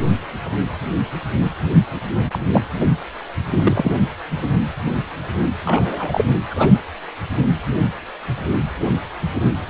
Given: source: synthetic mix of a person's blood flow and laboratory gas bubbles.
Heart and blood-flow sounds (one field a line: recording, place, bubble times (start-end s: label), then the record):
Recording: Doppler ultrasound of blood flow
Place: precordium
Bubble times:
2.29-2.39 s: bubbles
2.53-2.62 s: bubbles
2.80-2.88 s: bubbles
3.51-3.92 s: bubbles
5.65-6.25 s: bubbles
6.50-6.77 s: bubbles
From the record:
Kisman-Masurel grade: 222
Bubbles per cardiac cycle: several, 3 to 8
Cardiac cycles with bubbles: 10 to 50%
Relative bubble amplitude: moderate (0.250 to 0.450)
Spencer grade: 2 (many but less than half of the cardiac periods contain bubble signals, singularly or in groups)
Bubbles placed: anywhere in the cardiac cycle